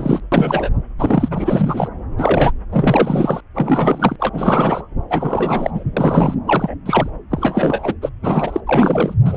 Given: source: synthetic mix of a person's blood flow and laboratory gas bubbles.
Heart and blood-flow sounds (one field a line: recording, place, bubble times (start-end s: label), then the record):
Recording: Doppler ultrasound of blood flow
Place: subclavian vein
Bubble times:
0.00-0.20 s: bubbles
0.32-0.70 s: bubbles
0.99-1.88 s: bubbles
2.17-2.52 s: bubbles
2.72-3.40 s: bubbles
3.55-4.16 s: bubbles
4.19-4.29 s: bubbles
4.33-4.83 s: bubbles
5.10-5.71 s: bubbles
5.74-5.84 s: bubbles
5.96-6.35 s: bubbles
6.47-6.75 s: bubbles
6.86-7.10 s: bubbles
7.30-7.95 s: bubbles
8.01-8.09 s: bubbles
8.22-8.61 s: bubbles
8.66-9.14 s: bubbles
9.25-9.37 s: bubbles
From the record:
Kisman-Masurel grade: 343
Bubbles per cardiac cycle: rolling drumbeat, 9 or more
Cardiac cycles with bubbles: 100%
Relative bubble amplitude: loud (0.450 to 0.775)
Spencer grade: 3 (all of the cardiac periods contain showers or single bubble signals, but not dominating or overriding the cardiac motion signals)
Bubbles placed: anywhere in the cardiac cycle